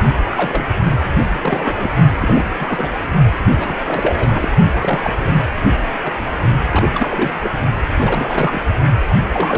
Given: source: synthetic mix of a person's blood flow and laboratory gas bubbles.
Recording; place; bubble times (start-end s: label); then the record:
Doppler ultrasound of blood flow; precordium
0.31-0.67 s: bubbles
1.32-1.90 s: bubbles
2.21-2.44 s: bubbles
2.59-2.91 s: bubbles
3.57-3.76 s: bubbles
3.86-4.49 s: bubbles
4.73-5.14 s: bubbles
5.18-5.42 s: bubbles
6.04-6.12 s: bubbles
6.71-6.89 s: bubbles
6.94-7.52 s: bubbles
7.98-8.65 s: bubbles
9.09-9.18 s: bubbles
9.32-9.58 s: bubbles
From the record:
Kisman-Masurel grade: 332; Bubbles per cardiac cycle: rolling drumbeat, 9 or more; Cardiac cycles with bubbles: 50 to 99%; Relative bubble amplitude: moderate (0.250 to 0.450); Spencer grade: 3 (all of the cardiac periods contain showers or single bubble signals, but not dominating or overriding the cardiac motion signals); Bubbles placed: only in the low amplitude regions of the cardiac cycle